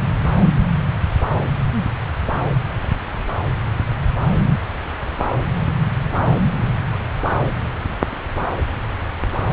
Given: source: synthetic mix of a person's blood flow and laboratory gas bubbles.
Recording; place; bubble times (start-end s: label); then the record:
Doppler ultrasound of blood flow; subclavian vein
no bubbles
From the record:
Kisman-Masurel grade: 000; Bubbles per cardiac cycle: 0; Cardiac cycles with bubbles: 0%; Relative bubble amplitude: no bubbles discernible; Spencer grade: 0 (complete lack of bubble signals)